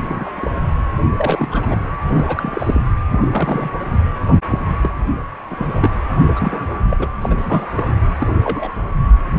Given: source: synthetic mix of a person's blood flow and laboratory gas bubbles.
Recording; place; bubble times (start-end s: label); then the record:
Doppler ultrasound of blood flow; precordium
0.01-0.31 s: bubbles
0.36-0.50 s: bubbles
1.17-1.82 s: bubbles
2.13-2.82 s: bubbles
3.09-3.79 s: bubbles
4.50-4.60 s: bubbles
4.81-4.90 s: bubbles
5.50-5.90 s: bubbles
5.94-5.98 s: bubbles
6.32-6.81 s: bubbles
6.90-7.08 s: bubbles
7.21-7.35 s: bubbles
7.38-7.95 s: bubbles
8.19-8.27 s: bubbles
8.44-8.70 s: bubbles
From the record:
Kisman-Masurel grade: 232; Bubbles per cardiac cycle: several, 3 to 8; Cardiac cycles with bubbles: 50 to 99%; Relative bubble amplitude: moderate (0.250 to 0.450); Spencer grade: 3 (all of the cardiac periods contain showers or single bubble signals, but not dominating or overriding the cardiac motion signals); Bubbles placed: anywhere in the cardiac cycle